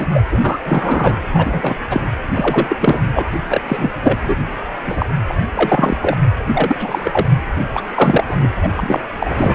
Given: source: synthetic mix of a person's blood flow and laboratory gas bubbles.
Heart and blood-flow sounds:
Doppler ultrasound of blood flow; precordium
0.00-0.06 s: bubbles
0.14-0.22 s: bubbles
0.31-0.58 s: bubbles
0.65-1.21 s: bubbles
1.33-1.74 s: bubbles
1.90-2.00 s: bubbles
2.33-2.77 s: bubbles
2.81-3.23 s: bubbles
3.49-3.61 s: bubbles
3.68-3.90 s: bubbles
4.02-4.19 s: bubbles
4.23-4.35 s: bubbles
4.87-5.06 s: bubbles
5.29-5.34 s: bubbles
5.54-5.97 s: bubbles
6.02-6.17 s: bubbles
6.53-6.77 s: bubbles
6.79-7.27 s: bubbles
7.74-7.82 s: bubbles
7.95-8.24 s: bubbles
8.27-8.48 s: bubbles
8.62-8.69 s: bubbles
8.76-9.01 s: bubbles
9.19-9.55 s: bubbles
From the record:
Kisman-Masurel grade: 343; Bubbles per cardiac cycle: rolling drumbeat, 9 or more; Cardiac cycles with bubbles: 100%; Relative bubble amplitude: loud (0.450 to 0.775); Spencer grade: 3 (all of the cardiac periods contain showers or single bubble signals, but not dominating or overriding the cardiac motion signals); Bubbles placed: anywhere in the cardiac cycle

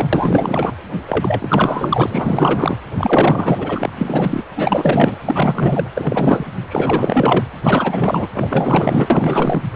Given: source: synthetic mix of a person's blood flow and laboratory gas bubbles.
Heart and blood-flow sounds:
Doppler ultrasound of blood flow; precordium
0.00-0.08 s: bubbles
0.12-0.74 s: bubbles
1.08-2.79 s: bubbles
2.98-3.92 s: bubbles
4.00-4.43 s: bubbles
4.56-5.17 s: bubbles
5.25-5.88 s: bubbles
5.93-6.50 s: bubbles
6.69-7.45 s: bubbles
7.62-8.28 s: bubbles
8.32-9.62 s: bubbles
9.73-9.76 s: bubbles
From the record:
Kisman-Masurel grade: 444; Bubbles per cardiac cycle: continuous sound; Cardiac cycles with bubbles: 100%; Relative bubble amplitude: maximal (0.775 to 0.999); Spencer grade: 4 (maximum detectable bubble signal sounding continuously throughout systole and diastole of every cardiac period, and overriding the amplitude of the normal cardiac signals); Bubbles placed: anywhere in the cardiac cycle

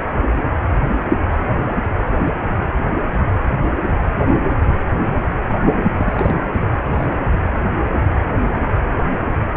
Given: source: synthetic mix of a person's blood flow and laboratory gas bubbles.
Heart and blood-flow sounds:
Doppler ultrasound of blood flow; precordium
5.97-6.36 s: bubbles
6.52-6.62 s: bubbles
6.92-7.09 s: bubbles
From the record:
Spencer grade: 1 (occasional bubble signal discernible with the cardiac motion signal, with majority of cardiac periods free of bubbles); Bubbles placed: anywhere in the cardiac cycle

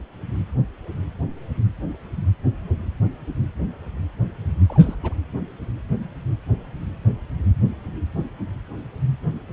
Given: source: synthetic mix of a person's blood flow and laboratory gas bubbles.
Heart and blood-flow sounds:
Doppler ultrasound of blood flow; precordium
4.69-4.96 s: bubbles
5.04-5.14 s: bubbles
From the record:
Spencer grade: 1 (occasional bubble signal discernible with the cardiac motion signal, with majority of cardiac periods free of bubbles); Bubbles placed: anywhere in the cardiac cycle

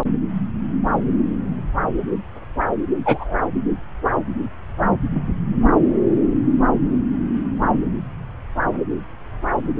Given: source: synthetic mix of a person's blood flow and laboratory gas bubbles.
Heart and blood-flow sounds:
Doppler ultrasound of blood flow; subclavian vein
3.05-3.34 s: bubbles
From the record:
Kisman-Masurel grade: 113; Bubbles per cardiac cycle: 1 to 2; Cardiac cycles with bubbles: 1 to 10%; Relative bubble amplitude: loud (0.450 to 0.775); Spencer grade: 1 (occasional bubble signal discernible with the cardiac motion signal, with majority of cardiac periods free of bubbles); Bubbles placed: anywhere in the cardiac cycle

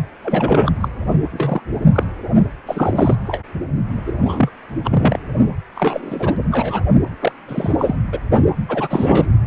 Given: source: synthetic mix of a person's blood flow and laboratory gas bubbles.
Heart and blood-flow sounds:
Doppler ultrasound of blood flow; precordium
0.23-0.72 s: bubbles
0.80-0.89 s: bubbles
1.32-1.61 s: bubbles
1.93-2.04 s: bubbles
2.66-3.16 s: bubbles
3.26-3.41 s: bubbles
4.07-4.12 s: bubbles
4.25-4.50 s: bubbles
4.84-5.18 s: bubbles
5.75-6.37 s: bubbles
6.52-6.81 s: bubbles
7.21-7.32 s: bubbles
7.48-7.74 s: bubbles
7.79-7.96 s: bubbles
8.12-8.20 s: bubbles
8.69-9.33 s: bubbles
From the record:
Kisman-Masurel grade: 242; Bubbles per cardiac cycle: several, 3 to 8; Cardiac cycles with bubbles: 100%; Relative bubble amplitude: moderate (0.250 to 0.450); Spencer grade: 3 (all of the cardiac periods contain showers or single bubble signals, but not dominating or overriding the cardiac motion signals); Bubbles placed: only in the low amplitude regions of the cardiac cycle

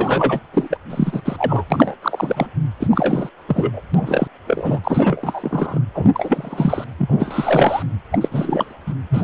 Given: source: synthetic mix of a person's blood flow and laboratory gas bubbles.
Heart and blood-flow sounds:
Doppler ultrasound of blood flow; precordium
0.00-0.39 s: bubbles
0.53-0.78 s: bubbles
0.90-1.22 s: bubbles
1.25-1.64 s: bubbles
1.70-1.95 s: bubbles
2.02-2.46 s: bubbles
2.79-2.87 s: bubbles
2.90-3.29 s: bubbles
3.48-3.81 s: bubbles
3.94-4.28 s: bubbles
4.47-4.79 s: bubbles
4.83-5.79 s: bubbles
5.94-6.11 s: bubbles
6.14-6.85 s: bubbles
6.98-7.83 s: bubbles
8.12-8.29 s: bubbles
8.31-8.73 s: bubbles
8.86-8.94 s: bubbles
9.10-9.24 s: bubbles
From the record:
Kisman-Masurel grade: 343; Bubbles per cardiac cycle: rolling drumbeat, 9 or more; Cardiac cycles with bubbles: 100%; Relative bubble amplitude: loud (0.450 to 0.775); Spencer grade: 3 (all of the cardiac periods contain showers or single bubble signals, but not dominating or overriding the cardiac motion signals); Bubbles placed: anywhere in the cardiac cycle

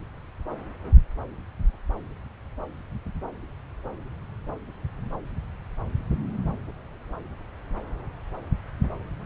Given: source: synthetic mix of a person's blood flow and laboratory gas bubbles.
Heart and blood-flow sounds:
Doppler ultrasound of blood flow; subclavian vein
no bubbles
From the record:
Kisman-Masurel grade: 000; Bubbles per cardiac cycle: 0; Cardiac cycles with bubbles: 0%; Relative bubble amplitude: no bubbles discernible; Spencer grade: 0 (complete lack of bubble signals)

